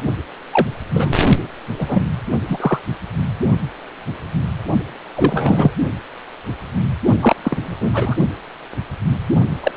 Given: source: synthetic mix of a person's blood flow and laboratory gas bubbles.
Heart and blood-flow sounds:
Doppler ultrasound of blood flow; precordium
0.51-0.67 s: bubbles
0.94-1.14 s: bubbles
1.78-2.10 s: bubbles
2.48-2.79 s: bubbles
5.15-5.73 s: bubbles
7.21-7.36 s: bubbles
7.43-7.57 s: bubbles
7.60-8.16 s: bubbles
9.63-9.71 s: bubbles
From the record:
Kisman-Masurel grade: 233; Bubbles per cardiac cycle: several, 3 to 8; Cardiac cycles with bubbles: 50 to 99%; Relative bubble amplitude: loud (0.450 to 0.775); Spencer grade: 3 (all of the cardiac periods contain showers or single bubble signals, but not dominating or overriding the cardiac motion signals); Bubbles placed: only in the low amplitude regions of the cardiac cycle

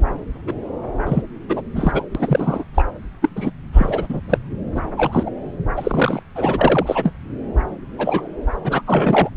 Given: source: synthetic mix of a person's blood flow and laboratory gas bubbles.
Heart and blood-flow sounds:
Doppler ultrasound of blood flow; subclavian vein
0.47-0.53 s: bubbles
1.05-1.22 s: bubbles
1.49-1.61 s: bubbles
1.75-2.02 s: bubbles
2.15-2.63 s: bubbles
2.74-2.83 s: bubbles
3.21-3.29 s: bubbles
3.35-3.50 s: bubbles
3.73-4.21 s: bubbles
4.28-4.38 s: bubbles
4.75-4.81 s: bubbles
4.96-5.30 s: bubbles
5.77-6.23 s: bubbles
6.35-7.12 s: bubbles
7.98-8.28 s: bubbles
8.64-8.81 s: bubbles
8.87-9.29 s: bubbles
From the record:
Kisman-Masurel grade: 243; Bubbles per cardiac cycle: several, 3 to 8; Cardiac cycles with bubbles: 100%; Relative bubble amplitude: loud (0.450 to 0.775); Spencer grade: 3 (all of the cardiac periods contain showers or single bubble signals, but not dominating or overriding the cardiac motion signals); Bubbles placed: anywhere in the cardiac cycle

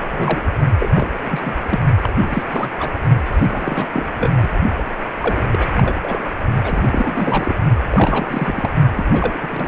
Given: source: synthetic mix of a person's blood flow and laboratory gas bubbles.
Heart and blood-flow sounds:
Doppler ultrasound of blood flow; precordium
0.11-0.41 s: bubbles
0.80-1.08 s: bubbles
1.14-1.18 s: bubbles
1.27-1.55 s: bubbles
1.69-1.81 s: bubbles
2.01-2.11 s: bubbles
2.20-2.43 s: bubbles
2.48-2.69 s: bubbles
2.79-2.91 s: bubbles
3.25-3.86 s: bubbles
3.94-4.06 s: bubbles
4.19-4.48 s: bubbles
4.77-4.85 s: bubbles
5.20-5.43 s: bubbles
5.52-5.98 s: bubbles
6.03-6.24 s: bubbles
6.64-7.56 s: bubbles
7.91-8.71 s: bubbles
8.95-9.06 s: bubbles
9.12-9.68 s: bubbles
From the record:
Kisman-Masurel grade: 342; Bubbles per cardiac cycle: rolling drumbeat, 9 or more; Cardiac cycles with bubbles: 100%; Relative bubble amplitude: moderate (0.250 to 0.450); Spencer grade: 3 (all of the cardiac periods contain showers or single bubble signals, but not dominating or overriding the cardiac motion signals); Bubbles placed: only in the low amplitude regions of the cardiac cycle

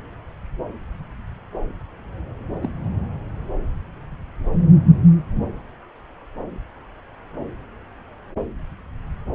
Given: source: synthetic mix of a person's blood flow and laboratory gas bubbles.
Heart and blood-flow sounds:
Doppler ultrasound of blood flow; subclavian vein
2.62-2.69 s: bubbles
From the record:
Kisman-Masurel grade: 112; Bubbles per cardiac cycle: 1 to 2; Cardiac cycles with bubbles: 1 to 10%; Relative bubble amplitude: moderate (0.250 to 0.450); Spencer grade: 1 (occasional bubble signal discernible with the cardiac motion signal, with majority of cardiac periods free of bubbles); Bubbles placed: anywhere in the cardiac cycle

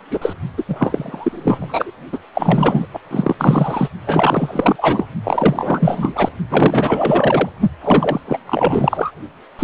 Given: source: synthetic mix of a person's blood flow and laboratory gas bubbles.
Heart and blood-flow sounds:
Doppler ultrasound of blood flow; precordium
0.10-0.33 s: bubbles
0.57-0.63 s: bubbles
0.68-1.91 s: bubbles
2.12-2.18 s: bubbles
2.34-2.87 s: bubbles
2.93-2.99 s: bubbles
3.11-3.88 s: bubbles
4.06-5.06 s: bubbles
5.24-6.29 s: bubbles
6.50-7.50 s: bubbles
7.81-8.21 s: bubbles
8.27-8.38 s: bubbles
8.46-9.12 s: bubbles
9.59-9.64 s: bubbles
From the record:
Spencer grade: 4 (maximum detectable bubble signal sounding continuously throughout systole and diastole of every cardiac period, and overriding the amplitude of the normal cardiac signals); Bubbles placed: only in the low amplitude regions of the cardiac cycle

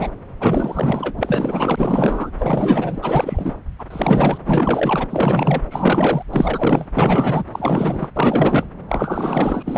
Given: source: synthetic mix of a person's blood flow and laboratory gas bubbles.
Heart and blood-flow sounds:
Doppler ultrasound of blood flow; subclavian vein
0.00-0.10 s: bubbles
0.40-1.14 s: bubbles
1.17-2.31 s: bubbles
2.38-3.56 s: bubbles
3.79-3.85 s: bubbles
3.90-4.38 s: bubbles
4.45-5.07 s: bubbles
5.09-5.62 s: bubbles
5.70-6.22 s: bubbles
6.30-6.87 s: bubbles
6.97-7.45 s: bubbles
7.53-8.10 s: bubbles
8.16-8.67 s: bubbles
8.89-9.78 s: bubbles
From the record:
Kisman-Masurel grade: 444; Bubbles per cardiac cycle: continuous sound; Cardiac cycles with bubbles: 100%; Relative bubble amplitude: maximal (0.775 to 0.999); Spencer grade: 4 (maximum detectable bubble signal sounding continuously throughout systole and diastole of every cardiac period, and overriding the amplitude of the normal cardiac signals); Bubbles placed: anywhere in the cardiac cycle

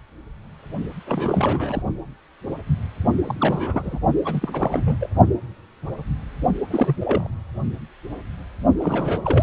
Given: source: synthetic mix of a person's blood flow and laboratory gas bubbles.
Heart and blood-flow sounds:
Doppler ultrasound of blood flow; precordium
1.06-1.82 s: bubbles
3.24-3.99 s: bubbles
4.25-4.96 s: bubbles
5.00-5.09 s: bubbles
6.70-6.96 s: bubbles
7.00-7.27 s: bubbles
8.79-9.42 s: bubbles
From the record:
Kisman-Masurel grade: 332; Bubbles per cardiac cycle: rolling drumbeat, 9 or more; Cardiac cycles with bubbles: 50 to 99%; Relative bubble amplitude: moderate (0.250 to 0.450); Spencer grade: 3 (all of the cardiac periods contain showers or single bubble signals, but not dominating or overriding the cardiac motion signals); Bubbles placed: only in the low amplitude regions of the cardiac cycle

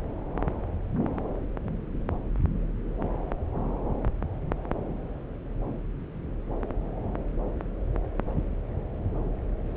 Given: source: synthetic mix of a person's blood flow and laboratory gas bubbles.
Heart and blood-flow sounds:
Doppler ultrasound of blood flow; subclavian vein
9.75-9.77 s: bubbles
From the record:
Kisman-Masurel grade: 213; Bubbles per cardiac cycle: several, 3 to 8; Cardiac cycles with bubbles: 1 to 10%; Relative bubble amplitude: loud (0.450 to 0.775); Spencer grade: 1 (occasional bubble signal discernible with the cardiac motion signal, with majority of cardiac periods free of bubbles); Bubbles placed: anywhere in the cardiac cycle

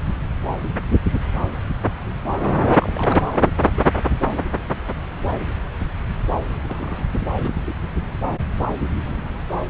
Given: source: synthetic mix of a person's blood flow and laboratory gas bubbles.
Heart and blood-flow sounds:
Doppler ultrasound of blood flow; subclavian vein
2.79-3.53 s: bubbles
3.62-3.68 s: bubbles
3.77-3.83 s: bubbles
6.12-6.38 s: bubbles
6.63-7.07 s: bubbles
7.39-7.62 s: bubbles
7.65-7.73 s: bubbles
From the record:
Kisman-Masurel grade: 221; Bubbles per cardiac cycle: several, 3 to 8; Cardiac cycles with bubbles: 10 to 50%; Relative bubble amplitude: barely perceptible (0.100 to 0.250); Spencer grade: 2 (many but less than half of the cardiac periods contain bubble signals, singularly or in groups); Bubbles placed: anywhere in the cardiac cycle

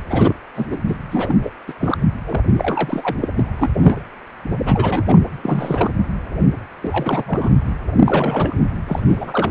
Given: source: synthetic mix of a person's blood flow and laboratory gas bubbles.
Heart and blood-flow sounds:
Doppler ultrasound of blood flow; precordium
0.09-0.35 s: bubbles
0.55-0.66 s: bubbles
0.70-0.81 s: bubbles
0.86-0.96 s: bubbles
1.10-1.52 s: bubbles
1.68-1.73 s: bubbles
1.80-1.97 s: bubbles
2.25-2.41 s: bubbles
2.55-3.17 s: bubbles
3.21-3.28 s: bubbles
3.37-3.48 s: bubbles
3.56-3.71 s: bubbles
3.81-4.03 s: bubbles
4.63-5.03 s: bubbles
5.06-5.19 s: bubbles
5.42-5.91 s: bubbles
6.82-7.52 s: bubbles
8.04-8.55 s: bubbles
8.87-9.50 s: bubbles
From the record:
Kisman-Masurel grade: 332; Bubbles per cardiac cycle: rolling drumbeat, 9 or more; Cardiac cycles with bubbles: 50 to 99%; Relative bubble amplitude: moderate (0.250 to 0.450); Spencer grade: 3 (all of the cardiac periods contain showers or single bubble signals, but not dominating or overriding the cardiac motion signals); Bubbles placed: anywhere in the cardiac cycle

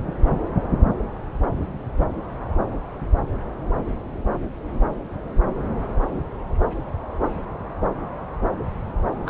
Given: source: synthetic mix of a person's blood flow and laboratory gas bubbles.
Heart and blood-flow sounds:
Doppler ultrasound of blood flow; subclavian vein
9.26-9.30 s: bubbles
From the record:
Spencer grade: 1 (occasional bubble signal discernible with the cardiac motion signal, with majority of cardiac periods free of bubbles); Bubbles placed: anywhere in the cardiac cycle

